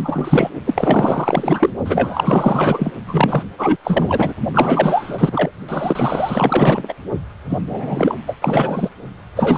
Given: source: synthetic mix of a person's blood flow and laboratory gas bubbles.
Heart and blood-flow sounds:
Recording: Doppler ultrasound of blood flow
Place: precordium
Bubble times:
0.00-0.50 s: bubbles
0.65-1.70 s: bubbles
1.85-2.91 s: bubbles
3.07-3.44 s: bubbles
3.58-3.77 s: bubbles
3.83-4.33 s: bubbles
4.53-5.51 s: bubbles
5.68-6.94 s: bubbles
7.49-7.59 s: bubbles
7.69-8.15 s: bubbles
8.27-8.37 s: bubbles
8.42-8.89 s: bubbles
9.36-9.58 s: bubbles
From the record:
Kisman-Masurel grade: 444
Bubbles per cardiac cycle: continuous sound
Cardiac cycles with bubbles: 100%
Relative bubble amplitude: maximal (0.775 to 0.999)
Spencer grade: 4 (maximum detectable bubble signal sounding continuously throughout systole and diastole of every cardiac period, and overriding the amplitude of the normal cardiac signals)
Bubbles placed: only in the low amplitude regions of the cardiac cycle

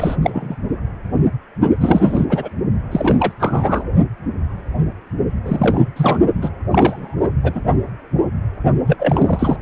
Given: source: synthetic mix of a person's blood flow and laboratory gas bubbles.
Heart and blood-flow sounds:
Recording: Doppler ultrasound of blood flow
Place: precordium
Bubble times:
0.00-0.16 s: bubbles
0.22-0.56 s: bubbles
1.80-2.25 s: bubbles
2.29-2.49 s: bubbles
2.91-3.33 s: bubbles
3.40-3.84 s: bubbles
5.45-5.89 s: bubbles
5.96-6.20 s: bubbles
6.42-6.50 s: bubbles
6.71-7.16 s: bubbles
7.20-7.29 s: bubbles
7.43-7.52 s: bubbles
7.54-7.61 s: bubbles
8.86-8.96 s: bubbles
8.99-9.57 s: bubbles
From the record:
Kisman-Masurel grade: 333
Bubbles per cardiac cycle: rolling drumbeat, 9 or more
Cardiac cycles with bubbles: 50 to 99%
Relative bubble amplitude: loud (0.450 to 0.775)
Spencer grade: 3 (all of the cardiac periods contain showers or single bubble signals, but not dominating or overriding the cardiac motion signals)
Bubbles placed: only in the low amplitude regions of the cardiac cycle

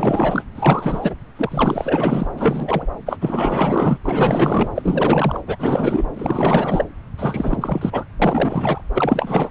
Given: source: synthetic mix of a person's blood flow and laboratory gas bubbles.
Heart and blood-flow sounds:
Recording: Doppler ultrasound of blood flow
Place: subclavian vein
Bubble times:
0.00-0.44 s: bubbles
0.55-1.15 s: bubbles
1.36-2.27 s: bubbles
2.34-2.87 s: bubbles
3.06-3.17 s: bubbles
3.21-3.98 s: bubbles
4.05-4.69 s: bubbles
4.75-5.40 s: bubbles
5.46-6.06 s: bubbles
6.14-6.84 s: bubbles
7.17-8.04 s: bubbles
8.21-8.84 s: bubbles
8.94-9.50 s: bubbles
From the record:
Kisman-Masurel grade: 444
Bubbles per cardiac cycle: continuous sound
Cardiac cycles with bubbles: 100%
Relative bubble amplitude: maximal (0.775 to 0.999)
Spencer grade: 4 (maximum detectable bubble signal sounding continuously throughout systole and diastole of every cardiac period, and overriding the amplitude of the normal cardiac signals)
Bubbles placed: anywhere in the cardiac cycle

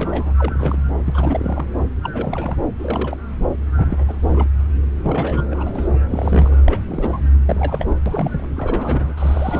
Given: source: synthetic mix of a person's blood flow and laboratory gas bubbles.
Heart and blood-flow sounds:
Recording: Doppler ultrasound of blood flow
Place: subclavian vein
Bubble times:
0.00-0.34 s: bubbles
0.39-0.83 s: bubbles
1.05-1.66 s: bubbles
2.03-2.57 s: bubbles
2.79-3.17 s: bubbles
3.75-4.48 s: bubbles
5.03-5.42 s: bubbles
5.50-5.71 s: bubbles
5.75-5.88 s: bubbles
6.09-6.57 s: bubbles
6.65-7.20 s: bubbles
7.45-7.96 s: bubbles
8.05-8.48 s: bubbles
8.56-9.12 s: bubbles
9.17-9.60 s: bubbles
From the record:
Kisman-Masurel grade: 342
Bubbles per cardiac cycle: rolling drumbeat, 9 or more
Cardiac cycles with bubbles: 100%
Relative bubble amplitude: moderate (0.250 to 0.450)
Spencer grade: 3 (all of the cardiac periods contain showers or single bubble signals, but not dominating or overriding the cardiac motion signals)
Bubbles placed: anywhere in the cardiac cycle

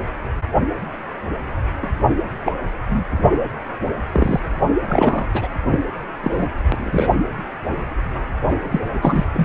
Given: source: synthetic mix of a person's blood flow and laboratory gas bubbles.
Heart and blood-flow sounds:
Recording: Doppler ultrasound of blood flow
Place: precordium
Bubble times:
1.82-1.90 s: bubbles
2.46-2.52 s: bubbles
2.88-3.06 s: bubbles
4.11-4.40 s: bubbles
4.89-5.26 s: bubbles
5.33-5.48 s: bubbles
5.66-5.79 s: bubbles
6.22-6.47 s: bubbles
6.72-7.15 s: bubbles
8.71-8.80 s: bubbles
9.01-9.24 s: bubbles
9.33-9.45 s: bubbles
From the record:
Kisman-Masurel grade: 233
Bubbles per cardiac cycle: several, 3 to 8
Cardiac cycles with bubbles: 50 to 99%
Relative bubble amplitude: loud (0.450 to 0.775)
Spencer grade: 3 (all of the cardiac periods contain showers or single bubble signals, but not dominating or overriding the cardiac motion signals)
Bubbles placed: anywhere in the cardiac cycle

